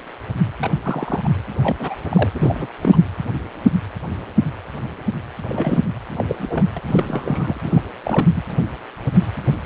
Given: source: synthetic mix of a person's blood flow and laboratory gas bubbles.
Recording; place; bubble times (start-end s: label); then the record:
Doppler ultrasound of blood flow; precordium
0.60-0.71 s: bubbles
0.82-1.28 s: bubbles
1.59-1.75 s: bubbles
1.79-1.95 s: bubbles
2.04-2.31 s: bubbles
2.35-2.67 s: bubbles
2.81-3.09 s: bubbles
5.49-5.80 s: bubbles
6.17-6.25 s: bubbles
6.29-6.65 s: bubbles
6.77-6.81 s: bubbles
6.88-7.58 s: bubbles
7.63-7.82 s: bubbles
8.03-8.26 s: bubbles
8.35-8.42 s: bubbles
From the record:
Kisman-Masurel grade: 222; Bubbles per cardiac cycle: several, 3 to 8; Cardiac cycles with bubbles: 10 to 50%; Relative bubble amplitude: moderate (0.250 to 0.450); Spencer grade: 2 (many but less than half of the cardiac periods contain bubble signals, singularly or in groups); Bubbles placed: anywhere in the cardiac cycle